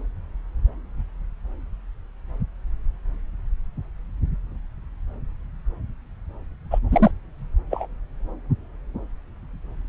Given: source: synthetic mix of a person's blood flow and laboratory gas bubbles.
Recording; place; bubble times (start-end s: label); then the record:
Doppler ultrasound of blood flow; subclavian vein
6.71-6.79 s: bubbles
6.91-7.11 s: bubbles
7.71-7.88 s: bubbles
From the record:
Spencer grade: 1 (occasional bubble signal discernible with the cardiac motion signal, with majority of cardiac periods free of bubbles); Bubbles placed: anywhere in the cardiac cycle